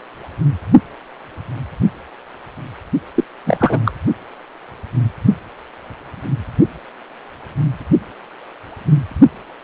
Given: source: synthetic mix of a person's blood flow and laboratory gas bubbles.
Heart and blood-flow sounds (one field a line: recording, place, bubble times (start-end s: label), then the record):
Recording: Doppler ultrasound of blood flow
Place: precordium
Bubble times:
3.16-3.24 s: bubbles
3.46-3.79 s: bubbles
3.85-3.92 s: bubbles
From the record:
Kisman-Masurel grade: 213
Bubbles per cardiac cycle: several, 3 to 8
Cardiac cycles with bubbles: 1 to 10%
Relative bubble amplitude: loud (0.450 to 0.775)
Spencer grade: 1 (occasional bubble signal discernible with the cardiac motion signal, with majority of cardiac periods free of bubbles)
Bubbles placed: only in the low amplitude regions of the cardiac cycle